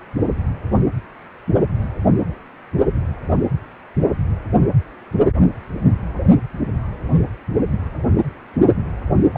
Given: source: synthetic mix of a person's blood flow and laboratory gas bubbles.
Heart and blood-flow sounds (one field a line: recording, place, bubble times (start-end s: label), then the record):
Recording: Doppler ultrasound of blood flow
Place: precordium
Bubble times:
9.33-9.37 s: bubbles
From the record:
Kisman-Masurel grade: 111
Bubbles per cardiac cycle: 1 to 2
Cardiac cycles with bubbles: 1 to 10%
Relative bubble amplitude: barely perceptible (0.100 to 0.250)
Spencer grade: 1 (occasional bubble signal discernible with the cardiac motion signal, with majority of cardiac periods free of bubbles)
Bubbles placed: only in the low amplitude regions of the cardiac cycle